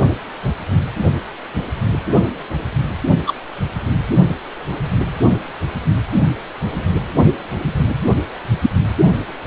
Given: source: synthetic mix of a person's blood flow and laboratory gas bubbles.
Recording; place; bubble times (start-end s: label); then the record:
Doppler ultrasound of blood flow; precordium
3.27-3.33 s: bubbles
From the record:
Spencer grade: 1 (occasional bubble signal discernible with the cardiac motion signal, with majority of cardiac periods free of bubbles); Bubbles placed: only in the low amplitude regions of the cardiac cycle